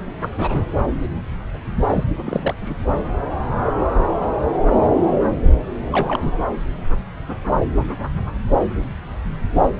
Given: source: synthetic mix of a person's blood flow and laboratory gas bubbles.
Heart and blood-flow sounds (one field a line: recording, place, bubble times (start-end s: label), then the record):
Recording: Doppler ultrasound of blood flow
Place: subclavian vein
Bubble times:
0.21-0.29 s: bubbles
0.37-0.63 s: bubbles
1.89-2.04 s: bubbles
2.25-2.54 s: bubbles
2.61-2.74 s: bubbles
5.88-6.38 s: bubbles
From the record:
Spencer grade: 2 (many but less than half of the cardiac periods contain bubble signals, singularly or in groups)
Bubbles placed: anywhere in the cardiac cycle